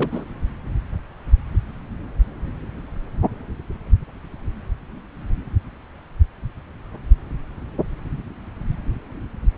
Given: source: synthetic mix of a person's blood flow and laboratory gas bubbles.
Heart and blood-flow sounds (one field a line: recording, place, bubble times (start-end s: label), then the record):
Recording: Doppler ultrasound of blood flow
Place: subclavian vein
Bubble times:
0.00-0.26 s: bubbles
From the record:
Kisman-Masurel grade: 212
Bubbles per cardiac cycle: several, 3 to 8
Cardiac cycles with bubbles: 1 to 10%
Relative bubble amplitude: moderate (0.250 to 0.450)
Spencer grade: 1 (occasional bubble signal discernible with the cardiac motion signal, with majority of cardiac periods free of bubbles)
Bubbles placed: anywhere in the cardiac cycle